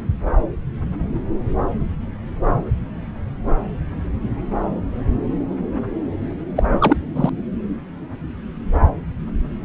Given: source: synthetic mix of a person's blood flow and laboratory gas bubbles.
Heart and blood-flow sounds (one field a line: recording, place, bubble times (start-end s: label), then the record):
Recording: Doppler ultrasound of blood flow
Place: subclavian vein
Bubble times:
6.55-6.63 s: bubbles
6.79-6.97 s: bubbles
7.16-7.30 s: bubbles
From the record:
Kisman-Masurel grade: 213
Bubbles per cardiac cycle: several, 3 to 8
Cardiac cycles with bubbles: 1 to 10%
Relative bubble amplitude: loud (0.450 to 0.775)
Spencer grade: 1 (occasional bubble signal discernible with the cardiac motion signal, with majority of cardiac periods free of bubbles)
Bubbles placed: anywhere in the cardiac cycle